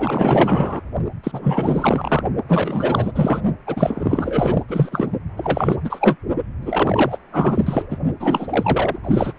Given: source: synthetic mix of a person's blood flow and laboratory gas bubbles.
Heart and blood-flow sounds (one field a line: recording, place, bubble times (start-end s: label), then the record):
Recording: Doppler ultrasound of blood flow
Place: precordium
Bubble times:
0.00-0.81 s: bubbles
1.23-2.22 s: bubbles
2.48-3.12 s: bubbles
3.15-3.42 s: bubbles
3.67-4.64 s: bubbles
4.68-5.11 s: bubbles
5.37-5.76 s: bubbles
5.85-6.16 s: bubbles
6.61-7.19 s: bubbles
7.32-7.86 s: bubbles
7.90-7.97 s: bubbles
8.20-8.99 s: bubbles
9.04-9.33 s: bubbles
From the record:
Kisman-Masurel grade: 444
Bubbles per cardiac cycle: continuous sound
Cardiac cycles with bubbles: 100%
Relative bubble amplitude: maximal (0.775 to 0.999)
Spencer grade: 4 (maximum detectable bubble signal sounding continuously throughout systole and diastole of every cardiac period, and overriding the amplitude of the normal cardiac signals)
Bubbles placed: only in the low amplitude regions of the cardiac cycle